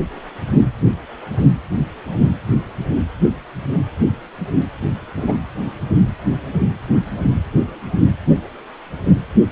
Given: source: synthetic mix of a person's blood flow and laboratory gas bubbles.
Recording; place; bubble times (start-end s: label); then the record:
Doppler ultrasound of blood flow; precordium
5.16-5.34 s: bubbles
From the record:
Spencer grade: 1 (occasional bubble signal discernible with the cardiac motion signal, with majority of cardiac periods free of bubbles); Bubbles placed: anywhere in the cardiac cycle